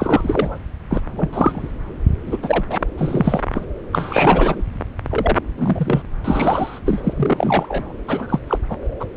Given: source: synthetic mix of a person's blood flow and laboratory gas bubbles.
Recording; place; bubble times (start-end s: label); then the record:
Doppler ultrasound of blood flow; subclavian vein
0.00-0.59 s: bubbles
0.90-1.01 s: bubbles
1.16-1.30 s: bubbles
1.33-1.71 s: bubbles
2.26-2.38 s: bubbles
2.42-2.64 s: bubbles
2.69-2.80 s: bubbles
2.97-3.41 s: bubbles
3.54-3.66 s: bubbles
3.92-4.62 s: bubbles
5.09-5.38 s: bubbles
5.57-6.02 s: bubbles
6.24-6.79 s: bubbles
6.85-7.13 s: bubbles
7.16-7.94 s: bubbles
8.07-8.39 s: bubbles
8.47-8.58 s: bubbles
8.69-8.77 s: bubbles
9.00-9.05 s: bubbles
From the record:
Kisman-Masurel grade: 243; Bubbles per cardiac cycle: several, 3 to 8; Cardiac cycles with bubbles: 100%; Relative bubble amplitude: loud (0.450 to 0.775); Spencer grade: 3 (all of the cardiac periods contain showers or single bubble signals, but not dominating or overriding the cardiac motion signals); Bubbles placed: anywhere in the cardiac cycle